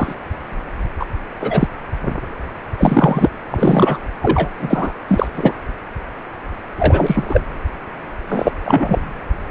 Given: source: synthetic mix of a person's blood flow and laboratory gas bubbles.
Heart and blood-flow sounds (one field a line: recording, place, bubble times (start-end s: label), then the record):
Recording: Doppler ultrasound of blood flow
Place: precordium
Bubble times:
0.00-0.14 s: bubbles
0.99-1.05 s: bubbles
1.40-1.68 s: bubbles
2.78-3.29 s: bubbles
3.50-4.01 s: bubbles
4.22-4.48 s: bubbles
4.59-4.92 s: bubbles
5.07-5.28 s: bubbles
5.35-5.54 s: bubbles
6.78-7.40 s: bubbles
8.29-8.51 s: bubbles
8.64-9.00 s: bubbles
From the record:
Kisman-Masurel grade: 233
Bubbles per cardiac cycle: several, 3 to 8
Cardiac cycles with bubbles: 50 to 99%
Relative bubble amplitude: loud (0.450 to 0.775)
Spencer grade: 3 (all of the cardiac periods contain showers or single bubble signals, but not dominating or overriding the cardiac motion signals)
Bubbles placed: anywhere in the cardiac cycle